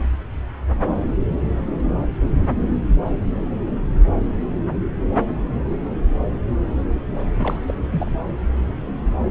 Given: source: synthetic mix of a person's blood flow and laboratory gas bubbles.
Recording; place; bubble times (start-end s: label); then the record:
Doppler ultrasound of blood flow; subclavian vein
7.38-7.61 s: bubbles
7.68-7.74 s: bubbles
7.90-8.20 s: bubbles
From the record:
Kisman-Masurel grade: 211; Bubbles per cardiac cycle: several, 3 to 8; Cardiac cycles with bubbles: 1 to 10%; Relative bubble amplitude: barely perceptible (0.100 to 0.250); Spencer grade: 1 (occasional bubble signal discernible with the cardiac motion signal, with majority of cardiac periods free of bubbles); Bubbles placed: anywhere in the cardiac cycle